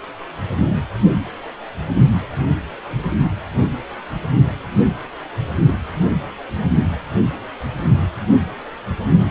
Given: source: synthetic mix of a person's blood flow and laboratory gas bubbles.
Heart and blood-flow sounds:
Doppler ultrasound of blood flow; precordium
no bubbles
From the record:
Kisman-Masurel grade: 000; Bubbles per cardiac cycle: 0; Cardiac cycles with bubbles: 0%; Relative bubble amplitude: no bubbles discernible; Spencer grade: 0 (complete lack of bubble signals)

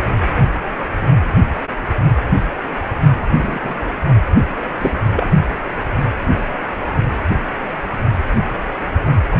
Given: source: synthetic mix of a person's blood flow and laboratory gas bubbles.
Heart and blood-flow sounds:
Doppler ultrasound of blood flow; precordium
3.38-3.59 s: bubbles
3.64-3.92 s: bubbles
4.81-4.92 s: bubbles
5.16-5.29 s: bubbles
9.32-9.37 s: bubbles
From the record:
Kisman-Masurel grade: 122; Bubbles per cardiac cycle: 1 to 2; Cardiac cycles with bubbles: 10 to 50%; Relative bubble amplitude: moderate (0.250 to 0.450); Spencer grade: 2 (many but less than half of the cardiac periods contain bubble signals, singularly or in groups); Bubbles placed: only in the low amplitude regions of the cardiac cycle

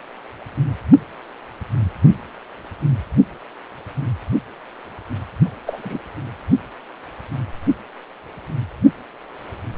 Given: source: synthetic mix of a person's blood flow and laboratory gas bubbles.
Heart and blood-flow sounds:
Doppler ultrasound of blood flow; precordium
5.67-5.81 s: bubbles
5.84-5.98 s: bubbles
From the record:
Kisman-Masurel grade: 212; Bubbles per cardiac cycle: several, 3 to 8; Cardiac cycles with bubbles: 1 to 10%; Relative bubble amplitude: moderate (0.250 to 0.450); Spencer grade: 1 (occasional bubble signal discernible with the cardiac motion signal, with majority of cardiac periods free of bubbles); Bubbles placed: only in the low amplitude regions of the cardiac cycle

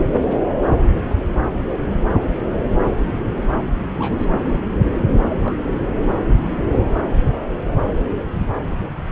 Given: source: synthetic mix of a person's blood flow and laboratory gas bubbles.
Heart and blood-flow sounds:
Doppler ultrasound of blood flow; subclavian vein
0.29-0.37 s: bubbles
1.10-1.15 s: bubbles
3.99-4.30 s: bubbles
4.47-4.60 s: bubbles
5.29-5.58 s: bubbles
6.55-6.65 s: bubbles
6.72-6.82 s: bubbles
From the record:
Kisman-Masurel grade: 121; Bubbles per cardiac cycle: 1 to 2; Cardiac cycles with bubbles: 10 to 50%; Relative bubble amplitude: barely perceptible (0.100 to 0.250); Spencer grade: 2 (many but less than half of the cardiac periods contain bubble signals, singularly or in groups); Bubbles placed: anywhere in the cardiac cycle

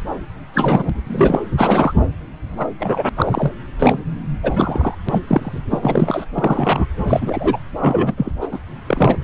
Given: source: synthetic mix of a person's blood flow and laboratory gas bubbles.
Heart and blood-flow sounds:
Doppler ultrasound of blood flow; subclavian vein
0.53-0.90 s: bubbles
1.07-1.40 s: bubbles
1.57-1.94 s: bubbles
2.46-2.69 s: bubbles
2.78-3.09 s: bubbles
3.17-3.51 s: bubbles
3.79-4.03 s: bubbles
4.43-4.95 s: bubbles
5.08-5.22 s: bubbles
5.27-5.61 s: bubbles
5.71-5.79 s: bubbles
5.82-6.25 s: bubbles
6.34-6.86 s: bubbles
7.07-7.59 s: bubbles
7.79-8.33 s: bubbles
8.41-8.47 s: bubbles
8.52-8.59 s: bubbles
8.87-9.17 s: bubbles
From the record:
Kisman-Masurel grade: 243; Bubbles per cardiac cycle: several, 3 to 8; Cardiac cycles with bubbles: 100%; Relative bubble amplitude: loud (0.450 to 0.775); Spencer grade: 3 (all of the cardiac periods contain showers or single bubble signals, but not dominating or overriding the cardiac motion signals); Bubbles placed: anywhere in the cardiac cycle

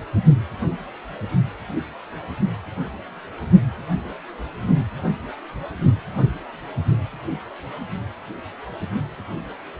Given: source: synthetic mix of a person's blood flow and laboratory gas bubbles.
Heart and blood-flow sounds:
Doppler ultrasound of blood flow; precordium
no bubbles
From the record:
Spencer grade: 0 (complete lack of bubble signals)

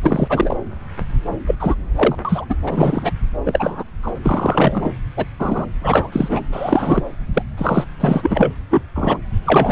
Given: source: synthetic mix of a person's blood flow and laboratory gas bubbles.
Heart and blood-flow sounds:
Doppler ultrasound of blood flow; subclavian vein
0.02-0.56 s: bubbles
1.46-1.55 s: bubbles
1.60-1.75 s: bubbles
1.95-2.16 s: bubbles
2.25-2.46 s: bubbles
2.49-2.55 s: bubbles
2.62-3.11 s: bubbles
3.45-3.83 s: bubbles
4.03-4.12 s: bubbles
4.22-4.92 s: bubbles
5.17-5.25 s: bubbles
5.40-5.66 s: bubbles
5.81-6.41 s: bubbles
6.51-7.03 s: bubbles
7.33-7.42 s: bubbles
7.58-7.84 s: bubbles
8.00-8.50 s: bubbles
8.71-8.82 s: bubbles
8.95-9.18 s: bubbles
9.44-9.72 s: bubbles
From the record:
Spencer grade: 3 (all of the cardiac periods contain showers or single bubble signals, but not dominating or overriding the cardiac motion signals); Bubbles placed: anywhere in the cardiac cycle

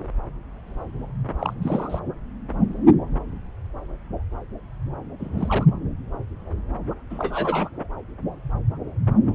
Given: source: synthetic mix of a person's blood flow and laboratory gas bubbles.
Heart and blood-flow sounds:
Doppler ultrasound of blood flow; subclavian vein
1.39-1.53 s: bubbles
1.62-2.00 s: bubbles
5.20-5.71 s: bubbles
7.10-7.70 s: bubbles
From the record:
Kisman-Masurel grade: 221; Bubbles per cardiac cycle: several, 3 to 8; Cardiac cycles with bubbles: 10 to 50%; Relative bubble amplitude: barely perceptible (0.100 to 0.250); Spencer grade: 2 (many but less than half of the cardiac periods contain bubble signals, singularly or in groups); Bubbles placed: anywhere in the cardiac cycle

